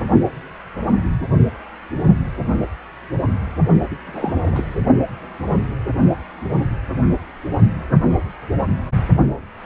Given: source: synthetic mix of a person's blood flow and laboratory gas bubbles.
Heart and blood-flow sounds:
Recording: Doppler ultrasound of blood flow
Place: precordium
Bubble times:
3.91-3.96 s: bubbles
4.07-4.78 s: bubbles
From the record:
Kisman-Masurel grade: 212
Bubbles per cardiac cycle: several, 3 to 8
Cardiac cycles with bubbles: 1 to 10%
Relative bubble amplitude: moderate (0.250 to 0.450)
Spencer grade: 1 (occasional bubble signal discernible with the cardiac motion signal, with majority of cardiac periods free of bubbles)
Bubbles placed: only in the low amplitude regions of the cardiac cycle

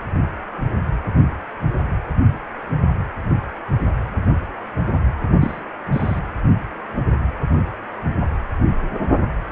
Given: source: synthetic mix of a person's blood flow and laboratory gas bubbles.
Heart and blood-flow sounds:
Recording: Doppler ultrasound of blood flow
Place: precordium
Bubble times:
5.40-5.60 s: bubbles
5.92-6.20 s: bubbles
From the record:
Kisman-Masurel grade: 112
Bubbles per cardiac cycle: 1 to 2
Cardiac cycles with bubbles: 1 to 10%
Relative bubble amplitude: moderate (0.250 to 0.450)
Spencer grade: 1 (occasional bubble signal discernible with the cardiac motion signal, with majority of cardiac periods free of bubbles)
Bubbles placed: anywhere in the cardiac cycle

